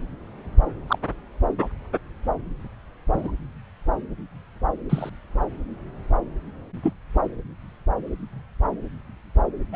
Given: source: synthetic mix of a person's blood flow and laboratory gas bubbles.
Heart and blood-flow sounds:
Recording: Doppler ultrasound of blood flow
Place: subclavian vein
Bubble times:
0.87-0.98 s: bubbles
1.61-1.68 s: bubbles
3.12-3.31 s: bubbles
4.90-5.10 s: bubbles
6.83-6.93 s: bubbles
9.72-9.76 s: bubbles
From the record:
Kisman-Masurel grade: 122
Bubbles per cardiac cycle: 1 to 2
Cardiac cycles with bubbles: 10 to 50%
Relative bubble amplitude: moderate (0.250 to 0.450)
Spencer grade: 2 (many but less than half of the cardiac periods contain bubble signals, singularly or in groups)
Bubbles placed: anywhere in the cardiac cycle

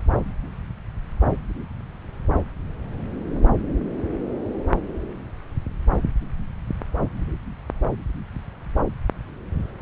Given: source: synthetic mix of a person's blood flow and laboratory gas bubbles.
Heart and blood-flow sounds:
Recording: Doppler ultrasound of blood flow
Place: subclavian vein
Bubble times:
no bubbles
From the record:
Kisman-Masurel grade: 000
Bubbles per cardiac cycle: 0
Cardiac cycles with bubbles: 0%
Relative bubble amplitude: no bubbles discernible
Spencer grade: 0 (complete lack of bubble signals)

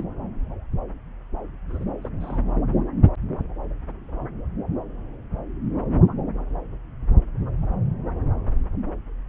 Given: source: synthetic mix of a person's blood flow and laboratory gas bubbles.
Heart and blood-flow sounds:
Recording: Doppler ultrasound of blood flow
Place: subclavian vein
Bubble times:
0.00-0.03 s: bubbles
1.69-1.85 s: bubbles
2.04-2.10 s: bubbles
2.20-2.40 s: bubbles
From the record:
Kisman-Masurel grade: 221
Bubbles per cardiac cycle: several, 3 to 8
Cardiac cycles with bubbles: 10 to 50%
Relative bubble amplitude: barely perceptible (0.100 to 0.250)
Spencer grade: 2 (many but less than half of the cardiac periods contain bubble signals, singularly or in groups)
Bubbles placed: anywhere in the cardiac cycle

